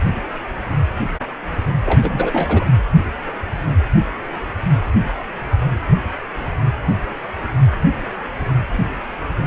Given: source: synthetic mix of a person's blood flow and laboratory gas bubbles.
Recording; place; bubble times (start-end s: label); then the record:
Doppler ultrasound of blood flow; precordium
1.85-2.69 s: bubbles
From the record:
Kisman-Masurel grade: 212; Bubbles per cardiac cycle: several, 3 to 8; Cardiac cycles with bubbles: 1 to 10%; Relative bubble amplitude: moderate (0.250 to 0.450); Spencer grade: 1 (occasional bubble signal discernible with the cardiac motion signal, with majority of cardiac periods free of bubbles); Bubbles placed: anywhere in the cardiac cycle